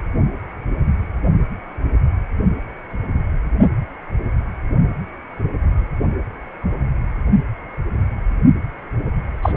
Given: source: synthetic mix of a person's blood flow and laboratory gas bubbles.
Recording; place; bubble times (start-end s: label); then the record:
Doppler ultrasound of blood flow; precordium
9.42-9.52 s: bubbles
From the record:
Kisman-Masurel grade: 213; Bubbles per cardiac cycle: several, 3 to 8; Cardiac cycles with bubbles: 1 to 10%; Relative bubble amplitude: loud (0.450 to 0.775); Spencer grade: 1 (occasional bubble signal discernible with the cardiac motion signal, with majority of cardiac periods free of bubbles); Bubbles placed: only in the low amplitude regions of the cardiac cycle